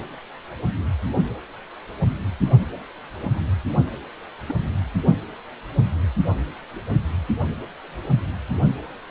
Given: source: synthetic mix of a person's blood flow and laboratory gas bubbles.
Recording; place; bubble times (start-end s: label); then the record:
Doppler ultrasound of blood flow; precordium
4.48-4.53 s: bubbles
From the record:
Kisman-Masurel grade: 111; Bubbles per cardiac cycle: 1 to 2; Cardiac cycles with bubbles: 1 to 10%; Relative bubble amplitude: barely perceptible (0.100 to 0.250); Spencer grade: 1 (occasional bubble signal discernible with the cardiac motion signal, with majority of cardiac periods free of bubbles); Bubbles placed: only in the low amplitude regions of the cardiac cycle